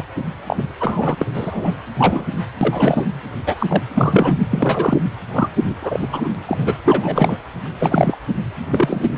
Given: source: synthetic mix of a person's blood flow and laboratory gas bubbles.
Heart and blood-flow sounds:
Doppler ultrasound of blood flow; precordium
0.00-0.04 s: bubbles
0.46-0.73 s: bubbles
0.80-1.15 s: bubbles
1.19-1.27 s: bubbles
1.33-1.77 s: bubbles
1.98-2.27 s: bubbles
2.61-3.05 s: bubbles
3.46-3.82 s: bubbles
3.95-4.38 s: bubbles
4.50-5.04 s: bubbles
5.32-5.50 s: bubbles
5.61-5.75 s: bubbles
5.81-6.08 s: bubbles
6.12-6.76 s: bubbles
6.85-7.37 s: bubbles
7.79-8.17 s: bubbles
8.70-9.18 s: bubbles
From the record:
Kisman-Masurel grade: 243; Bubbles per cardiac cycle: several, 3 to 8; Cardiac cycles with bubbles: 100%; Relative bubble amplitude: loud (0.450 to 0.775); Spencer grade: 3 (all of the cardiac periods contain showers or single bubble signals, but not dominating or overriding the cardiac motion signals); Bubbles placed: anywhere in the cardiac cycle

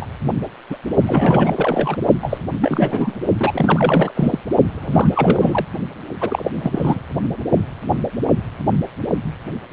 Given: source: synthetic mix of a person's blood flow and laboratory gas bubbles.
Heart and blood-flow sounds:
Doppler ultrasound of blood flow; precordium
0.01-0.06 s: bubbles
0.70-0.77 s: bubbles
0.89-1.97 s: bubbles
2.21-2.38 s: bubbles
2.61-3.20 s: bubbles
3.40-4.12 s: bubbles
4.15-4.38 s: bubbles
4.71-5.66 s: bubbles
6.21-6.50 s: bubbles
6.56-7.01 s: bubbles
From the record:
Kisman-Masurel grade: 332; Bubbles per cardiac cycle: rolling drumbeat, 9 or more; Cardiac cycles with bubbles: 50 to 99%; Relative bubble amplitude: moderate (0.250 to 0.450); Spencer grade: 3 (all of the cardiac periods contain showers or single bubble signals, but not dominating or overriding the cardiac motion signals); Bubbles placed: only in the low amplitude regions of the cardiac cycle

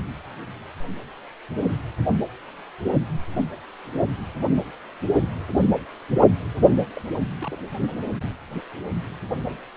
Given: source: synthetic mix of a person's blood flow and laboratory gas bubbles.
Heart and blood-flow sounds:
Doppler ultrasound of blood flow; precordium
6.75-6.88 s: bubbles
6.96-7.01 s: bubbles
7.38-7.58 s: bubbles
From the record:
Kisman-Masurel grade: 211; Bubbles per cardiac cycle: several, 3 to 8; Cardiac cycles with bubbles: 1 to 10%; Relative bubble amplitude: barely perceptible (0.100 to 0.250); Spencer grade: 1 (occasional bubble signal discernible with the cardiac motion signal, with majority of cardiac periods free of bubbles); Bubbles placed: only in the low amplitude regions of the cardiac cycle

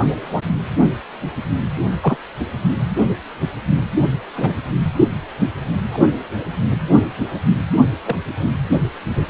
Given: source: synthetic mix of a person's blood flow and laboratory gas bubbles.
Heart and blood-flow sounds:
Doppler ultrasound of blood flow; precordium
2.01-2.17 s: bubbles
4.35-4.57 s: bubbles
5.93-5.98 s: bubbles
8.05-8.15 s: bubbles
From the record:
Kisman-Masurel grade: 122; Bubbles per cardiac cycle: 1 to 2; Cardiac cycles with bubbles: 10 to 50%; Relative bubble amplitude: moderate (0.250 to 0.450); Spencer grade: 2 (many but less than half of the cardiac periods contain bubble signals, singularly or in groups); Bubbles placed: anywhere in the cardiac cycle

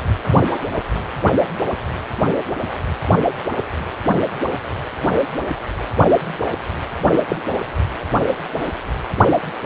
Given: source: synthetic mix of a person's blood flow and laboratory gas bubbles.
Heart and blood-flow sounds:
Doppler ultrasound of blood flow; precordium
7.29-7.36 s: bubbles
From the record:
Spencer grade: 1 (occasional bubble signal discernible with the cardiac motion signal, with majority of cardiac periods free of bubbles); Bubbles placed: only in the low amplitude regions of the cardiac cycle

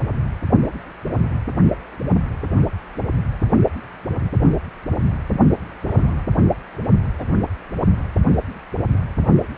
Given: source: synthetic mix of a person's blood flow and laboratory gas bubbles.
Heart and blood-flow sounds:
Doppler ultrasound of blood flow; precordium
5.81-6.23 s: bubbles
7.19-7.25 s: bubbles
From the record:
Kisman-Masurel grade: 121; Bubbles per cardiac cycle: 1 to 2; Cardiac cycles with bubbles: 10 to 50%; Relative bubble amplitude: barely perceptible (0.100 to 0.250); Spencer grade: 2 (many but less than half of the cardiac periods contain bubble signals, singularly or in groups); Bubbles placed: only in the low amplitude regions of the cardiac cycle

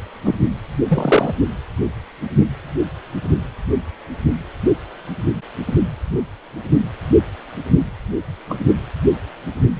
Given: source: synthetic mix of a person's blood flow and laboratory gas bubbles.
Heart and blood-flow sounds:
Doppler ultrasound of blood flow; precordium
0.24-0.35 s: bubbles
0.88-1.33 s: bubbles
8.49-8.57 s: bubbles
From the record:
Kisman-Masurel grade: 123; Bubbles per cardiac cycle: 1 to 2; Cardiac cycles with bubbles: 10 to 50%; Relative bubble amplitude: loud (0.450 to 0.775); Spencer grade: 2 (many but less than half of the cardiac periods contain bubble signals, singularly or in groups); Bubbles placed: only in the low amplitude regions of the cardiac cycle

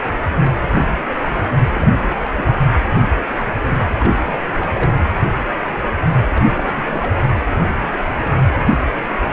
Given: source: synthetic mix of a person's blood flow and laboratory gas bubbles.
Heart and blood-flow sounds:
Doppler ultrasound of blood flow; precordium
1.74-2.18 s: bubbles
2.23-2.58 s: bubbles
3.89-4.12 s: bubbles
4.23-4.38 s: bubbles
4.57-4.91 s: bubbles
6.34-6.84 s: bubbles
6.90-7.12 s: bubbles
From the record:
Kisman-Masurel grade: 221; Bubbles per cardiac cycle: several, 3 to 8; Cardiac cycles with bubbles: 10 to 50%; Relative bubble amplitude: barely perceptible (0.100 to 0.250); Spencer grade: 2 (many but less than half of the cardiac periods contain bubble signals, singularly or in groups); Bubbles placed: anywhere in the cardiac cycle

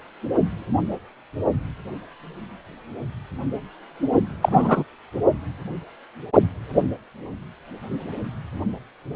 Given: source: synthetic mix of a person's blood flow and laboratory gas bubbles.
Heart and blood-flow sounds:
Doppler ultrasound of blood flow; precordium
4.42-4.83 s: bubbles
From the record:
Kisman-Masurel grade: 113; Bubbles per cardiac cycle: 1 to 2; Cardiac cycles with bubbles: 1 to 10%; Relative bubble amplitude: loud (0.450 to 0.775); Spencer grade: 1 (occasional bubble signal discernible with the cardiac motion signal, with majority of cardiac periods free of bubbles); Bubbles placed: only in the low amplitude regions of the cardiac cycle

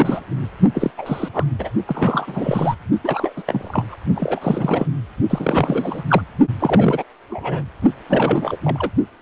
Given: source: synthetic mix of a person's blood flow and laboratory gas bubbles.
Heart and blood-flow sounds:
Doppler ultrasound of blood flow; precordium
0.00-0.20 s: bubbles
0.74-0.91 s: bubbles
0.97-1.28 s: bubbles
1.33-1.45 s: bubbles
1.59-1.70 s: bubbles
1.87-2.75 s: bubbles
3.04-3.33 s: bubbles
3.36-3.43 s: bubbles
3.47-3.97 s: bubbles
4.15-4.87 s: bubbles
5.29-6.04 s: bubbles
6.08-6.21 s: bubbles
6.59-7.04 s: bubbles
7.29-7.63 s: bubbles
8.09-8.56 s: bubbles
8.64-8.89 s: bubbles
From the record:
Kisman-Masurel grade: 342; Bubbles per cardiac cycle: rolling drumbeat, 9 or more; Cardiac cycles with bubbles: 100%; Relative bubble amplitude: moderate (0.250 to 0.450); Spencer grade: 3 (all of the cardiac periods contain showers or single bubble signals, but not dominating or overriding the cardiac motion signals); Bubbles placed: only in the low amplitude regions of the cardiac cycle

